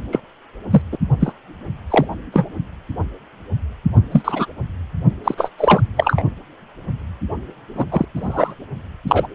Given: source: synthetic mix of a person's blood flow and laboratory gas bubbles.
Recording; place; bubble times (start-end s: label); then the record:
Doppler ultrasound of blood flow; precordium
0.11-0.20 s: bubbles
0.70-0.81 s: bubbles
0.92-0.97 s: bubbles
1.19-1.32 s: bubbles
1.90-2.05 s: bubbles
2.32-2.46 s: bubbles
4.11-4.46 s: bubbles
5.24-5.34 s: bubbles
5.37-5.51 s: bubbles
5.58-5.80 s: bubbles
5.96-6.22 s: bubbles
7.75-7.84 s: bubbles
7.91-8.05 s: bubbles
8.16-8.54 s: bubbles
9.07-9.28 s: bubbles
From the record:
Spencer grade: 3 (all of the cardiac periods contain showers or single bubble signals, but not dominating or overriding the cardiac motion signals); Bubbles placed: only in the low amplitude regions of the cardiac cycle